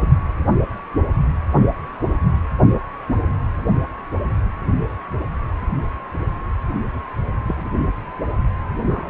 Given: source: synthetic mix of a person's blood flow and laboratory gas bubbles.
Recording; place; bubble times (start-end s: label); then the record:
Doppler ultrasound of blood flow; precordium
7.47-7.69 s: bubbles
8.88-9.10 s: bubbles
From the record:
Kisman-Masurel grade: 121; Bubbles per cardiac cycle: 1 to 2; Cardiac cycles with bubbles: 10 to 50%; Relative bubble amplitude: barely perceptible (0.100 to 0.250); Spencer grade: 2 (many but less than half of the cardiac periods contain bubble signals, singularly or in groups); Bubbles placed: only in the low amplitude regions of the cardiac cycle